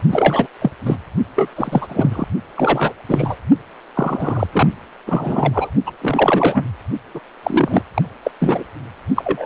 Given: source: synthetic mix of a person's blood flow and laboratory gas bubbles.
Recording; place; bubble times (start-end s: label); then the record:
Doppler ultrasound of blood flow; precordium
0.11-0.47 s: bubbles
0.61-0.71 s: bubbles
0.85-0.96 s: bubbles
1.35-1.50 s: bubbles
1.56-2.27 s: bubbles
2.56-2.94 s: bubbles
3.08-3.35 s: bubbles
3.95-4.47 s: bubbles
4.52-4.68 s: bubbles
5.06-5.70 s: bubbles
5.86-5.92 s: bubbles
6.01-6.64 s: bubbles
7.14-7.20 s: bubbles
7.43-7.82 s: bubbles
7.94-8.03 s: bubbles
8.23-8.31 s: bubbles
8.40-8.64 s: bubbles
9.16-9.46 s: bubbles
From the record:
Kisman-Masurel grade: 343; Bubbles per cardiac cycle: rolling drumbeat, 9 or more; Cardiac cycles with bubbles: 100%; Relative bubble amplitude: loud (0.450 to 0.775); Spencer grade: 3 (all of the cardiac periods contain showers or single bubble signals, but not dominating or overriding the cardiac motion signals); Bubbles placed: only in the low amplitude regions of the cardiac cycle